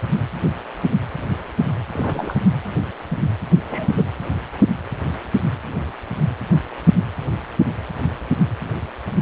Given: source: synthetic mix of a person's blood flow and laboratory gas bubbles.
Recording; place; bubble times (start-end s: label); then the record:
Doppler ultrasound of blood flow; precordium
1.93-2.38 s: bubbles
3.67-4.02 s: bubbles
From the record:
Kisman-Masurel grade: 212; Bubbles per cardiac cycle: several, 3 to 8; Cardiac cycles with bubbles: 1 to 10%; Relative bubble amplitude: moderate (0.250 to 0.450); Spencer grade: 1 (occasional bubble signal discernible with the cardiac motion signal, with majority of cardiac periods free of bubbles); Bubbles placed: anywhere in the cardiac cycle